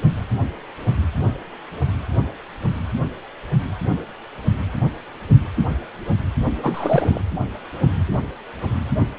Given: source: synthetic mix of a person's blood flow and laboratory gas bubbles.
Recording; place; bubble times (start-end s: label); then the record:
Doppler ultrasound of blood flow; precordium
6.62-7.21 s: bubbles
From the record:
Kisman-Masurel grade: 222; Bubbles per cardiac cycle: several, 3 to 8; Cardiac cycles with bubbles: 10 to 50%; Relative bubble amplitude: moderate (0.250 to 0.450); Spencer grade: 2 (many but less than half of the cardiac periods contain bubble signals, singularly or in groups); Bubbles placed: anywhere in the cardiac cycle